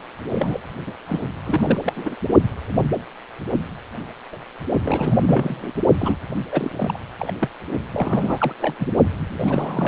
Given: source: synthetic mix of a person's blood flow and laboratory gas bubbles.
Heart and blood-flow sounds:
Doppler ultrasound of blood flow; precordium
0.32-0.61 s: bubbles
0.86-0.95 s: bubbles
1.07-1.28 s: bubbles
1.45-1.79 s: bubbles
1.82-1.93 s: bubbles
1.95-2.16 s: bubbles
4.82-5.73 s: bubbles
5.98-6.16 s: bubbles
6.51-6.98 s: bubbles
7.20-7.32 s: bubbles
7.41-7.49 s: bubbles
7.92-8.54 s: bubbles
8.60-8.75 s: bubbles
8.78-8.88 s: bubbles
9.29-9.88 s: bubbles
From the record:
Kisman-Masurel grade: 332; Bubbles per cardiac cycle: rolling drumbeat, 9 or more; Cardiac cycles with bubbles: 50 to 99%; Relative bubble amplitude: moderate (0.250 to 0.450); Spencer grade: 3 (all of the cardiac periods contain showers or single bubble signals, but not dominating or overriding the cardiac motion signals); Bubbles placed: only in the low amplitude regions of the cardiac cycle

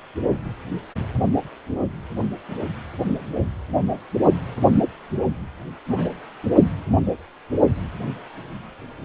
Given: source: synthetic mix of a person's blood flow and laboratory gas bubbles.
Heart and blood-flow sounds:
Doppler ultrasound of blood flow; precordium
5.87-6.09 s: bubbles
From the record:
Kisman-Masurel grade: 111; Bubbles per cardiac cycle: 1 to 2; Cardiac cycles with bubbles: 1 to 10%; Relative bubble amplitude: barely perceptible (0.100 to 0.250); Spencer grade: 1 (occasional bubble signal discernible with the cardiac motion signal, with majority of cardiac periods free of bubbles); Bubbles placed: only in the low amplitude regions of the cardiac cycle

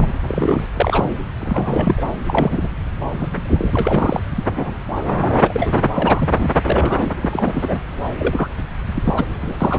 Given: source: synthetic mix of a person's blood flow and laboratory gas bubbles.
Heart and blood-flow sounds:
Doppler ultrasound of blood flow; subclavian vein
0.00-0.08 s: bubbles
0.21-0.66 s: bubbles
0.75-1.15 s: bubbles
1.41-2.02 s: bubbles
2.26-2.69 s: bubbles
3.00-3.71 s: bubbles
3.73-4.23 s: bubbles
4.35-4.43 s: bubbles
4.49-4.74 s: bubbles
5.21-5.90 s: bubbles
5.94-6.50 s: bubbles
6.62-7.16 s: bubbles
7.23-7.80 s: bubbles
8.18-8.47 s: bubbles
8.97-9.25 s: bubbles
9.40-9.57 s: bubbles
9.60-9.79 s: bubbles
From the record:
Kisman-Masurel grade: 242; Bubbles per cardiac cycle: several, 3 to 8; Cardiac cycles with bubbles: 100%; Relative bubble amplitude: moderate (0.250 to 0.450); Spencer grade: 3 (all of the cardiac periods contain showers or single bubble signals, but not dominating or overriding the cardiac motion signals); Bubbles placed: anywhere in the cardiac cycle

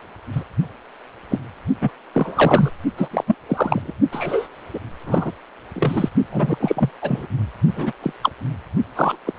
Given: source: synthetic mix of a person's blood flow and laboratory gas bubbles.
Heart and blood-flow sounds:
Doppler ultrasound of blood flow; precordium
0.35-0.44 s: bubbles
1.29-1.39 s: bubbles
1.81-1.91 s: bubbles
2.14-2.71 s: bubbles
2.97-3.08 s: bubbles
3.11-3.24 s: bubbles
3.27-3.35 s: bubbles
3.48-3.93 s: bubbles
4.12-4.48 s: bubbles
4.73-4.79 s: bubbles
5.06-5.31 s: bubbles
5.75-6.09 s: bubbles
6.31-6.90 s: bubbles
7.01-7.26 s: bubbles
7.75-7.93 s: bubbles
8.02-8.13 s: bubbles
8.22-8.30 s: bubbles
8.96-9.17 s: bubbles
9.26-9.33 s: bubbles
From the record:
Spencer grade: 3 (all of the cardiac periods contain showers or single bubble signals, but not dominating or overriding the cardiac motion signals); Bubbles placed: only in the low amplitude regions of the cardiac cycle

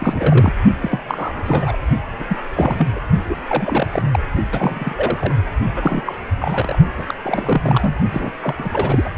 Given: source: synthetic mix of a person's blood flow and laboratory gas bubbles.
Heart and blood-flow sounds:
Doppler ultrasound of blood flow; precordium
0.00-0.53 s: bubbles
0.80-1.00 s: bubbles
1.07-1.76 s: bubbles
2.19-2.24 s: bubbles
2.27-2.37 s: bubbles
2.55-2.86 s: bubbles
2.92-2.99 s: bubbles
3.28-3.40 s: bubbles
3.47-4.02 s: bubbles
4.11-4.20 s: bubbles
4.52-5.33 s: bubbles
5.75-6.15 s: bubbles
6.39-6.77 s: bubbles
6.97-7.14 s: bubbles
7.22-7.95 s: bubbles
8.11-8.31 s: bubbles
8.41-8.54 s: bubbles
8.58-8.69 s: bubbles
8.72-9.10 s: bubbles
From the record:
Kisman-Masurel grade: 342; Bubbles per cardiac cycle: rolling drumbeat, 9 or more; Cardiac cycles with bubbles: 100%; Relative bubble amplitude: moderate (0.250 to 0.450); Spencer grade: 3 (all of the cardiac periods contain showers or single bubble signals, but not dominating or overriding the cardiac motion signals); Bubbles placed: only in the low amplitude regions of the cardiac cycle

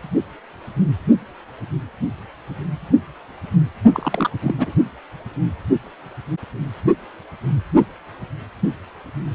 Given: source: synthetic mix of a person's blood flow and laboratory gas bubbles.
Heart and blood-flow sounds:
Doppler ultrasound of blood flow; precordium
3.94-4.30 s: bubbles
4.42-4.54 s: bubbles
4.58-4.72 s: bubbles
From the record:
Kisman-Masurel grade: 212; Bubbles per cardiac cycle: several, 3 to 8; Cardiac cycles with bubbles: 1 to 10%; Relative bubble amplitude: moderate (0.250 to 0.450); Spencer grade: 1 (occasional bubble signal discernible with the cardiac motion signal, with majority of cardiac periods free of bubbles); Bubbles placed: only in the low amplitude regions of the cardiac cycle

